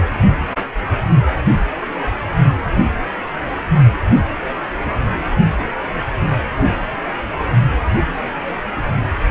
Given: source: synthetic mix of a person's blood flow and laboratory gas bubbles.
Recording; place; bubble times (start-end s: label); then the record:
Doppler ultrasound of blood flow; precordium
4.24-4.38 s: bubbles
From the record:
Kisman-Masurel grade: 111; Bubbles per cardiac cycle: 1 to 2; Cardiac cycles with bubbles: 1 to 10%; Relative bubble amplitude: barely perceptible (0.100 to 0.250); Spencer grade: 1 (occasional bubble signal discernible with the cardiac motion signal, with majority of cardiac periods free of bubbles); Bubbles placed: anywhere in the cardiac cycle